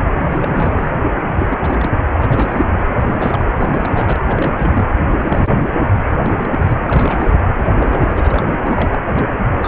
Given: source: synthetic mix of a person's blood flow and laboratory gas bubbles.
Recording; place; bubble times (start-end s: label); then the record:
Doppler ultrasound of blood flow; precordium
0.16-0.38 s: bubbles
0.40-0.91 s: bubbles
1.16-1.22 s: bubbles
1.27-1.58 s: bubbles
1.63-1.90 s: bubbles
2.12-2.79 s: bubbles
2.84-2.90 s: bubbles
2.96-3.45 s: bubbles
3.58-4.20 s: bubbles
4.26-4.85 s: bubbles
5.20-5.72 s: bubbles
5.92-6.00 s: bubbles
6.25-6.33 s: bubbles
6.37-6.78 s: bubbles
6.84-7.34 s: bubbles
7.78-8.53 s: bubbles
8.66-8.98 s: bubbles
9.08-9.29 s: bubbles
9.62-9.68 s: bubbles
From the record:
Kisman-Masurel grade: 342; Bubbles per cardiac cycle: rolling drumbeat, 9 or more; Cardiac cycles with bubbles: 100%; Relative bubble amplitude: moderate (0.250 to 0.450); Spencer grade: 3 (all of the cardiac periods contain showers or single bubble signals, but not dominating or overriding the cardiac motion signals); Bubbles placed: anywhere in the cardiac cycle